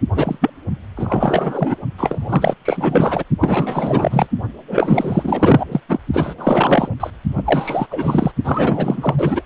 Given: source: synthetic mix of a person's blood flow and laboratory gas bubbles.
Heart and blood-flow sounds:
Doppler ultrasound of blood flow; precordium
0.15-0.50 s: bubbles
0.96-1.75 s: bubbles
1.98-2.54 s: bubbles
2.65-3.23 s: bubbles
3.40-4.27 s: bubbles
4.68-5.67 s: bubbles
5.72-5.80 s: bubbles
5.89-6.00 s: bubbles
6.13-6.35 s: bubbles
6.38-6.89 s: bubbles
7.00-7.10 s: bubbles
7.37-7.87 s: bubbles
7.90-8.31 s: bubbles
8.44-9.14 s: bubbles
9.17-9.43 s: bubbles
From the record:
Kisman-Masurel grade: 444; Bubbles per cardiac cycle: continuous sound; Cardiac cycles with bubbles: 100%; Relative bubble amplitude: maximal (0.775 to 0.999); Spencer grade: 4 (maximum detectable bubble signal sounding continuously throughout systole and diastole of every cardiac period, and overriding the amplitude of the normal cardiac signals); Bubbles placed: only in the low amplitude regions of the cardiac cycle

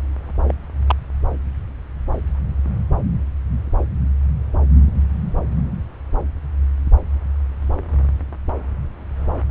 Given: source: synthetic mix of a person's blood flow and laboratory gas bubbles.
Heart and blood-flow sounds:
Doppler ultrasound of blood flow; subclavian vein
0.47-0.55 s: bubbles
0.86-0.95 s: bubbles
From the record:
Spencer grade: 2 (many but less than half of the cardiac periods contain bubble signals, singularly or in groups); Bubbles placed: anywhere in the cardiac cycle

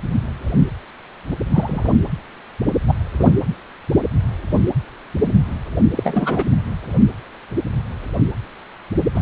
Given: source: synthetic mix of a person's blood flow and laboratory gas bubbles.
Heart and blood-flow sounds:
Doppler ultrasound of blood flow; precordium
1.52-1.96 s: bubbles
2.86-2.94 s: bubbles
3.19-3.31 s: bubbles
5.96-6.46 s: bubbles
9.14-9.22 s: bubbles
From the record:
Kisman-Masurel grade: 222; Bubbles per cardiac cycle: several, 3 to 8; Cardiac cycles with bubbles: 10 to 50%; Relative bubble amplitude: moderate (0.250 to 0.450); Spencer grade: 2 (many but less than half of the cardiac periods contain bubble signals, singularly or in groups); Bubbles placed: anywhere in the cardiac cycle

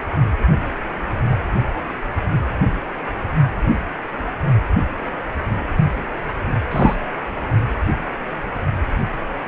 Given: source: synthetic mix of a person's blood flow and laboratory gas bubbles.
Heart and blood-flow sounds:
Doppler ultrasound of blood flow; precordium
6.71-6.95 s: bubbles
From the record:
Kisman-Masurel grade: 123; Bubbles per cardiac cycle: 1 to 2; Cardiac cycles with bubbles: 10 to 50%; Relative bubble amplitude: loud (0.450 to 0.775); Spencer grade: 2 (many but less than half of the cardiac periods contain bubble signals, singularly or in groups); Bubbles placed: only in the low amplitude regions of the cardiac cycle

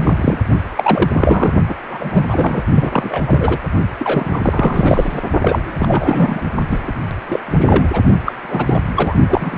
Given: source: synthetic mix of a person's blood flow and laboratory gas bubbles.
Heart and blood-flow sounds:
Doppler ultrasound of blood flow; precordium
0.00-0.38 s: bubbles
0.75-1.55 s: bubbles
1.68-1.75 s: bubbles
1.90-2.25 s: bubbles
2.28-2.64 s: bubbles
2.75-3.21 s: bubbles
3.26-3.58 s: bubbles
3.98-4.40 s: bubbles
4.43-5.19 s: bubbles
5.42-6.41 s: bubbles
6.69-6.80 s: bubbles
6.87-6.92 s: bubbles
7.28-7.39 s: bubbles
7.45-7.88 s: bubbles
7.92-8.02 s: bubbles
8.25-8.35 s: bubbles
8.43-8.79 s: bubbles
8.96-9.15 s: bubbles
9.28-9.58 s: bubbles
From the record:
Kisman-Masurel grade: 333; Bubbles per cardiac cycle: rolling drumbeat, 9 or more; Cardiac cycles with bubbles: 50 to 99%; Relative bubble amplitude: loud (0.450 to 0.775); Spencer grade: 3 (all of the cardiac periods contain showers or single bubble signals, but not dominating or overriding the cardiac motion signals); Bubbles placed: only in the low amplitude regions of the cardiac cycle

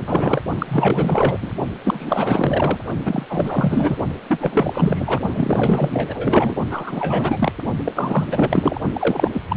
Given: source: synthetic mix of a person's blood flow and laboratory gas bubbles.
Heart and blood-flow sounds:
Doppler ultrasound of blood flow; precordium
0.00-0.41 s: bubbles
0.58-1.39 s: bubbles
1.42-1.51 s: bubbles
1.84-2.79 s: bubbles
3.05-3.26 s: bubbles
3.29-3.97 s: bubbles
4.28-5.20 s: bubbles
5.35-6.56 s: bubbles
6.70-7.52 s: bubbles
7.85-7.92 s: bubbles
7.95-8.24 s: bubbles
8.30-8.80 s: bubbles
8.93-9.30 s: bubbles
9.33-9.41 s: bubbles
9.49-9.57 s: bubbles
From the record:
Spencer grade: 4 (maximum detectable bubble signal sounding continuously throughout systole and diastole of every cardiac period, and overriding the amplitude of the normal cardiac signals); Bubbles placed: only in the low amplitude regions of the cardiac cycle

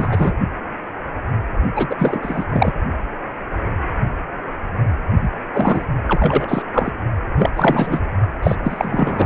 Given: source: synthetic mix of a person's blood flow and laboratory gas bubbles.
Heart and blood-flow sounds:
Doppler ultrasound of blood flow; precordium
0.00-0.32 s: bubbles
1.75-1.95 s: bubbles
1.99-2.45 s: bubbles
2.51-2.73 s: bubbles
5.21-5.29 s: bubbles
5.54-5.87 s: bubbles
6.07-6.62 s: bubbles
6.74-6.91 s: bubbles
7.36-7.50 s: bubbles
7.55-8.02 s: bubbles
8.43-8.55 s: bubbles
8.63-9.26 s: bubbles
From the record:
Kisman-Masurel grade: 333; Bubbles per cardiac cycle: rolling drumbeat, 9 or more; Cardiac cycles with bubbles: 50 to 99%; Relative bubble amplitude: loud (0.450 to 0.775); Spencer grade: 3 (all of the cardiac periods contain showers or single bubble signals, but not dominating or overriding the cardiac motion signals); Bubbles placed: only in the low amplitude regions of the cardiac cycle

